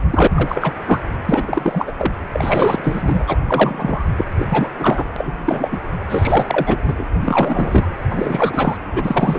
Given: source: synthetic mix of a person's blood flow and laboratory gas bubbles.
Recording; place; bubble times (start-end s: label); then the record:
Doppler ultrasound of blood flow; precordium
0.10-0.28 s: bubbles
0.30-0.72 s: bubbles
0.86-1.00 s: bubbles
1.25-1.92 s: bubbles
1.97-2.13 s: bubbles
2.33-3.22 s: bubbles
3.27-3.38 s: bubbles
3.47-4.03 s: bubbles
4.17-4.25 s: bubbles
4.39-4.47 s: bubbles
4.51-4.68 s: bubbles
4.79-5.04 s: bubbles
5.16-5.33 s: bubbles
5.45-5.69 s: bubbles
5.71-5.78 s: bubbles
6.08-6.78 s: bubbles
6.87-6.94 s: bubbles
6.97-7.04 s: bubbles
7.21-7.87 s: bubbles
8.09-8.77 s: bubbles
8.84-9.39 s: bubbles
From the record:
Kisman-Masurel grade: 333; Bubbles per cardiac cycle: rolling drumbeat, 9 or more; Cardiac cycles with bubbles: 50 to 99%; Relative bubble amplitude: loud (0.450 to 0.775); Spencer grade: 3 (all of the cardiac periods contain showers or single bubble signals, but not dominating or overriding the cardiac motion signals); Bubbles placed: anywhere in the cardiac cycle